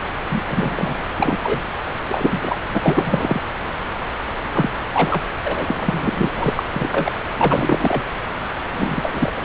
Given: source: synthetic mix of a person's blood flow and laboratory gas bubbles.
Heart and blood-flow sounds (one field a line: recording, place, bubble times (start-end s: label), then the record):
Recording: Doppler ultrasound of blood flow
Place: subclavian vein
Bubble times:
0.30-0.43 s: bubbles
0.48-0.99 s: bubbles
1.18-1.38 s: bubbles
1.43-1.60 s: bubbles
2.08-2.57 s: bubbles
2.68-3.41 s: bubbles
4.52-4.69 s: bubbles
4.93-5.22 s: bubbles
5.44-6.32 s: bubbles
6.35-6.63 s: bubbles
6.71-6.89 s: bubbles
6.92-7.12 s: bubbles
7.38-8.02 s: bubbles
8.72-9.30 s: bubbles
9.37-9.45 s: bubbles
From the record:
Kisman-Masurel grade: 243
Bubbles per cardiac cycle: several, 3 to 8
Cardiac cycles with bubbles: 100%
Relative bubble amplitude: loud (0.450 to 0.775)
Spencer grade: 3 (all of the cardiac periods contain showers or single bubble signals, but not dominating or overriding the cardiac motion signals)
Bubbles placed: anywhere in the cardiac cycle